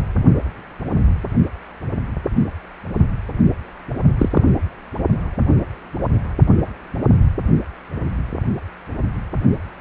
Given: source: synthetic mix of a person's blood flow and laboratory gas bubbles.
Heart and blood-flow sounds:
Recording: Doppler ultrasound of blood flow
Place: precordium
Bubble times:
4.19-4.29 s: bubbles
4.33-4.43 s: bubbles
From the record:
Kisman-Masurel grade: 113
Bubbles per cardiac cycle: 1 to 2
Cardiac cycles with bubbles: 1 to 10%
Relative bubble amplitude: loud (0.450 to 0.775)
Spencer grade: 1 (occasional bubble signal discernible with the cardiac motion signal, with majority of cardiac periods free of bubbles)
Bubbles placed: only in the low amplitude regions of the cardiac cycle

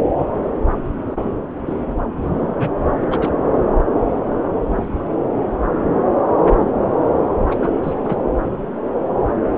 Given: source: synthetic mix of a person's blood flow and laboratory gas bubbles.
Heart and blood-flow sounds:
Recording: Doppler ultrasound of blood flow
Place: subclavian vein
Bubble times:
2.58-2.69 s: bubbles
3.01-3.06 s: bubbles
3.10-3.31 s: bubbles
7.51-7.55 s: bubbles
7.62-7.70 s: bubbles
7.82-7.95 s: bubbles
8.04-8.16 s: bubbles
From the record:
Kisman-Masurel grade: 222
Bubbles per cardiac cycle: several, 3 to 8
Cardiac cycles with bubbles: 10 to 50%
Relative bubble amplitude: moderate (0.250 to 0.450)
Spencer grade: 2 (many but less than half of the cardiac periods contain bubble signals, singularly or in groups)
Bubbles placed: anywhere in the cardiac cycle

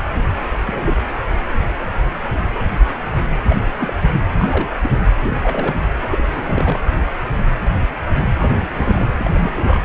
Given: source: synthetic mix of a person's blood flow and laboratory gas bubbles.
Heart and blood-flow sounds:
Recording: Doppler ultrasound of blood flow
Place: precordium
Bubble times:
0.64-0.96 s: bubbles
3.48-3.56 s: bubbles
3.79-3.94 s: bubbles
4.13-4.21 s: bubbles
4.34-4.77 s: bubbles
4.83-5.00 s: bubbles
5.21-5.41 s: bubbles
5.43-5.76 s: bubbles
6.03-6.79 s: bubbles
8.39-8.51 s: bubbles
8.57-8.66 s: bubbles
8.71-9.09 s: bubbles
9.17-9.30 s: bubbles
9.33-9.79 s: bubbles
From the record:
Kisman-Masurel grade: 221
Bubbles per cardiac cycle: several, 3 to 8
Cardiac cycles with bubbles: 10 to 50%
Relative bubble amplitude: barely perceptible (0.100 to 0.250)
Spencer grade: 2 (many but less than half of the cardiac periods contain bubble signals, singularly or in groups)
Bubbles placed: anywhere in the cardiac cycle

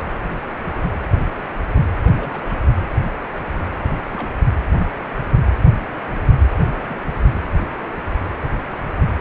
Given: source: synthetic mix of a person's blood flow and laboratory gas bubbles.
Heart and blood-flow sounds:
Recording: Doppler ultrasound of blood flow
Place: precordium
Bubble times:
2.02-2.68 s: bubbles
4.10-4.31 s: bubbles
6.79-6.99 s: bubbles
From the record:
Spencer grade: 2 (many but less than half of the cardiac periods contain bubble signals, singularly or in groups)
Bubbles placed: anywhere in the cardiac cycle

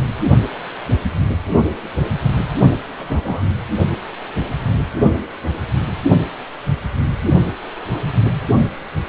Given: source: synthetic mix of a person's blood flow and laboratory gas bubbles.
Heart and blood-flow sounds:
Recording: Doppler ultrasound of blood flow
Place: precordium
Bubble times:
2.98-3.42 s: bubbles
From the record:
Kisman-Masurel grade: 112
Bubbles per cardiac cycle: 1 to 2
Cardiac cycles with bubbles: 1 to 10%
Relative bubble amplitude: moderate (0.250 to 0.450)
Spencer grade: 1 (occasional bubble signal discernible with the cardiac motion signal, with majority of cardiac periods free of bubbles)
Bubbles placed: only in the low amplitude regions of the cardiac cycle

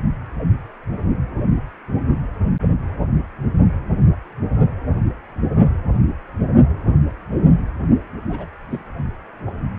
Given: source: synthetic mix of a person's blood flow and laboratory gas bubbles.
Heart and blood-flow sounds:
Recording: Doppler ultrasound of blood flow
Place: precordium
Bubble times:
8.29-8.46 s: bubbles
8.71-8.91 s: bubbles
From the record:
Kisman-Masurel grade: 211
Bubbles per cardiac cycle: several, 3 to 8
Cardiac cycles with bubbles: 1 to 10%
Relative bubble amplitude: barely perceptible (0.100 to 0.250)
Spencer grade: 1 (occasional bubble signal discernible with the cardiac motion signal, with majority of cardiac periods free of bubbles)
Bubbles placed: only in the low amplitude regions of the cardiac cycle

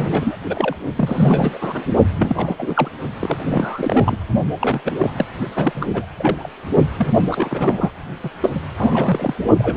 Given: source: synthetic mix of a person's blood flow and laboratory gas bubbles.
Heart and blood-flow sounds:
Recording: Doppler ultrasound of blood flow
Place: precordium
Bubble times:
0.00-0.36 s: bubbles
0.44-0.77 s: bubbles
0.95-1.86 s: bubbles
2.19-2.90 s: bubbles
3.19-3.37 s: bubbles
3.45-4.17 s: bubbles
4.59-4.80 s: bubbles
4.85-4.96 s: bubbles
4.98-5.12 s: bubbles
5.17-5.25 s: bubbles
5.55-6.05 s: bubbles
6.19-6.47 s: bubbles
6.97-7.08 s: bubbles
7.20-7.91 s: bubbles
8.22-8.29 s: bubbles
8.41-8.50 s: bubbles
8.54-8.61 s: bubbles
8.77-9.34 s: bubbles
9.58-9.77 s: bubbles
From the record:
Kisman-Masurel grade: 342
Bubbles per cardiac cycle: rolling drumbeat, 9 or more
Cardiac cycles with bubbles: 100%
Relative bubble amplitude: moderate (0.250 to 0.450)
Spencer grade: 3 (all of the cardiac periods contain showers or single bubble signals, but not dominating or overriding the cardiac motion signals)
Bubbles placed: only in the low amplitude regions of the cardiac cycle

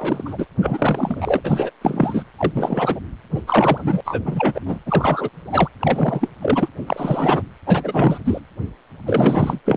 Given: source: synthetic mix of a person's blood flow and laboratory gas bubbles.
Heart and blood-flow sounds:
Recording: Doppler ultrasound of blood flow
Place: precordium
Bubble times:
0.00-0.45 s: bubbles
0.61-1.41 s: bubbles
1.44-1.70 s: bubbles
1.81-2.23 s: bubbles
2.37-3.00 s: bubbles
3.33-3.40 s: bubbles
3.47-4.00 s: bubbles
4.05-4.20 s: bubbles
4.24-4.60 s: bubbles
4.66-4.79 s: bubbles
4.85-5.29 s: bubbles
5.45-5.68 s: bubbles
5.81-6.28 s: bubbles
6.38-6.68 s: bubbles
6.87-7.42 s: bubbles
7.66-8.19 s: bubbles
8.24-8.40 s: bubbles
9.06-9.60 s: bubbles
9.65-9.77 s: bubbles
From the record:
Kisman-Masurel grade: 343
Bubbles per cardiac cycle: rolling drumbeat, 9 or more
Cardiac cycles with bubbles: 100%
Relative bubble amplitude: loud (0.450 to 0.775)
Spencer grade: 3 (all of the cardiac periods contain showers or single bubble signals, but not dominating or overriding the cardiac motion signals)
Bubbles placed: anywhere in the cardiac cycle

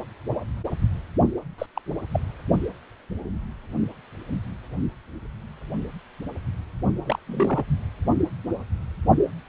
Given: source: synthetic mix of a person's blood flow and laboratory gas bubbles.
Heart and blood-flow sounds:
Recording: Doppler ultrasound of blood flow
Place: precordium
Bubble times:
1.58-1.66 s: bubbles
1.76-1.81 s: bubbles
2.12-2.20 s: bubbles
7.06-7.19 s: bubbles
7.27-7.63 s: bubbles
From the record:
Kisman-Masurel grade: 221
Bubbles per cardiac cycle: several, 3 to 8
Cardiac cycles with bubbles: 10 to 50%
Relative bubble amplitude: barely perceptible (0.100 to 0.250)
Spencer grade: 2 (many but less than half of the cardiac periods contain bubble signals, singularly or in groups)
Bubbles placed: only in the low amplitude regions of the cardiac cycle

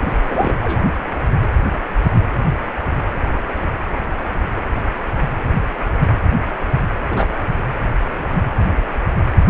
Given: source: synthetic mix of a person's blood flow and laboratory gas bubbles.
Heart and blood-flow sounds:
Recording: Doppler ultrasound of blood flow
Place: precordium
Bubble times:
0.01-0.55 s: bubbles
0.62-0.80 s: bubbles
7.11-7.34 s: bubbles
From the record:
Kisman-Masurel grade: 222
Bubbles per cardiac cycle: several, 3 to 8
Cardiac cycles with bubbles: 10 to 50%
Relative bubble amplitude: moderate (0.250 to 0.450)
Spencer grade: 2 (many but less than half of the cardiac periods contain bubble signals, singularly or in groups)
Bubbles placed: anywhere in the cardiac cycle

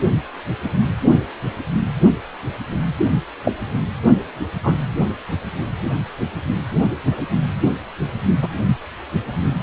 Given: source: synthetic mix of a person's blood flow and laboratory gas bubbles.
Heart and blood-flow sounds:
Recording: Doppler ultrasound of blood flow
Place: precordium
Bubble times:
3.44-3.52 s: bubbles
4.63-4.76 s: bubbles
8.42-8.48 s: bubbles
From the record:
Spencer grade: 2 (many but less than half of the cardiac periods contain bubble signals, singularly or in groups)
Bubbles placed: only in the low amplitude regions of the cardiac cycle

